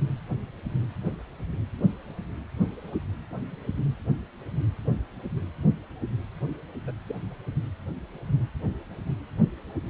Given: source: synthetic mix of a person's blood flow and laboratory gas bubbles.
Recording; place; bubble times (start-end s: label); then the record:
Doppler ultrasound of blood flow; precordium
6.87-6.91 s: bubbles
7.08-7.16 s: bubbles
From the record:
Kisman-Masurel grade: 111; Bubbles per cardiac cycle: 1 to 2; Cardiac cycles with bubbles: 1 to 10%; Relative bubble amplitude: barely perceptible (0.100 to 0.250); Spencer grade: 1 (occasional bubble signal discernible with the cardiac motion signal, with majority of cardiac periods free of bubbles); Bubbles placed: anywhere in the cardiac cycle